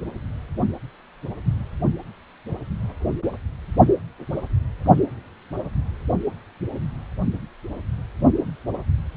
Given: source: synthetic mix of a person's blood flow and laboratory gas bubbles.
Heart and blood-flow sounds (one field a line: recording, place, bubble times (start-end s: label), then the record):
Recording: Doppler ultrasound of blood flow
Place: precordium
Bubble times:
no bubbles
From the record:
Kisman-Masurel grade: 000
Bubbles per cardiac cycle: 0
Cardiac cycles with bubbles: 0%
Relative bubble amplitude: no bubbles discernible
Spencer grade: 0 (complete lack of bubble signals)